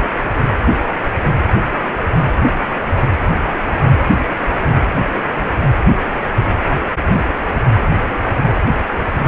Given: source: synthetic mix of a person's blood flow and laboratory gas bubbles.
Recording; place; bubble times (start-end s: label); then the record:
Doppler ultrasound of blood flow; precordium
no bubbles
From the record:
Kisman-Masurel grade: 000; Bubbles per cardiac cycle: 0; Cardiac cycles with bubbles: 0%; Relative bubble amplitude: no bubbles discernible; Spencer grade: 0 (complete lack of bubble signals)